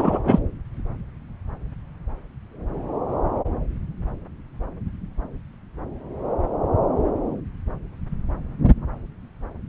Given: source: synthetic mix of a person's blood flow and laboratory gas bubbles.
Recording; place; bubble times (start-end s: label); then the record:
Doppler ultrasound of blood flow; subclavian vein
0.00-0.19 s: bubbles
0.25-0.39 s: bubbles
From the record:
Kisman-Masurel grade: 213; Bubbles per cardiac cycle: several, 3 to 8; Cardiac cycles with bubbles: 1 to 10%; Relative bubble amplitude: loud (0.450 to 0.775); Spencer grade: 1 (occasional bubble signal discernible with the cardiac motion signal, with majority of cardiac periods free of bubbles); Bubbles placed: anywhere in the cardiac cycle